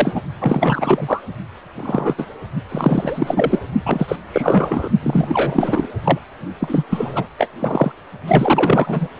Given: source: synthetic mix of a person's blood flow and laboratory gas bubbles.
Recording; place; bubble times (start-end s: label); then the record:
Doppler ultrasound of blood flow; precordium
0.00-0.21 s: bubbles
0.40-1.23 s: bubbles
1.75-2.15 s: bubbles
2.18-2.26 s: bubbles
2.69-3.59 s: bubbles
3.86-4.16 s: bubbles
4.33-4.89 s: bubbles
5.03-5.88 s: bubbles
6.04-6.19 s: bubbles
6.60-6.84 s: bubbles
6.90-7.28 s: bubbles
7.38-7.48 s: bubbles
7.59-7.92 s: bubbles
8.27-9.07 s: bubbles
From the record:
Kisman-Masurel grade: 343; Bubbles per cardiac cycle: rolling drumbeat, 9 or more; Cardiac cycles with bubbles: 100%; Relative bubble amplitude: loud (0.450 to 0.775); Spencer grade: 3 (all of the cardiac periods contain showers or single bubble signals, but not dominating or overriding the cardiac motion signals); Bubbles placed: only in the low amplitude regions of the cardiac cycle